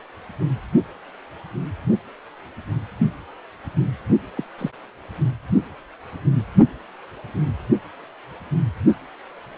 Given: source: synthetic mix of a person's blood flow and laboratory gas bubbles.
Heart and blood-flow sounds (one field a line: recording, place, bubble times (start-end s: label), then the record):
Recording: Doppler ultrasound of blood flow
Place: precordium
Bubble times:
4.35-4.43 s: bubbles
4.58-4.71 s: bubbles
From the record:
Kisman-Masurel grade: 122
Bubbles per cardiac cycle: 1 to 2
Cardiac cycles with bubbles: 10 to 50%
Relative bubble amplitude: moderate (0.250 to 0.450)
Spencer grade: 2 (many but less than half of the cardiac periods contain bubble signals, singularly or in groups)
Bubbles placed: only in the low amplitude regions of the cardiac cycle